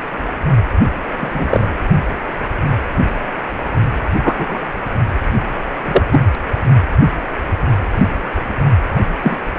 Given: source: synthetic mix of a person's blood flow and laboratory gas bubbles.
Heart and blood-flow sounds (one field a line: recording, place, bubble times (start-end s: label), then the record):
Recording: Doppler ultrasound of blood flow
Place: precordium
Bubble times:
1.18-1.70 s: bubbles
4.22-4.59 s: bubbles
5.85-6.03 s: bubbles
6.11-6.21 s: bubbles
9.23-9.38 s: bubbles
From the record:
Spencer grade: 2 (many but less than half of the cardiac periods contain bubble signals, singularly or in groups)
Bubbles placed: anywhere in the cardiac cycle